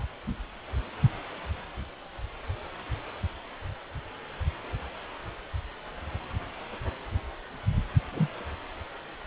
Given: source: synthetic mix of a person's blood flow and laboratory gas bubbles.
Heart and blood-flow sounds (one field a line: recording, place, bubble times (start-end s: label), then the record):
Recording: Doppler ultrasound of blood flow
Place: precordium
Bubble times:
8.14-8.29 s: bubbles
From the record:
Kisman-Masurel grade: 111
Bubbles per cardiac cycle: 1 to 2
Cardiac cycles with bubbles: 1 to 10%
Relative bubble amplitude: barely perceptible (0.100 to 0.250)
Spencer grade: 1 (occasional bubble signal discernible with the cardiac motion signal, with majority of cardiac periods free of bubbles)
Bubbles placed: anywhere in the cardiac cycle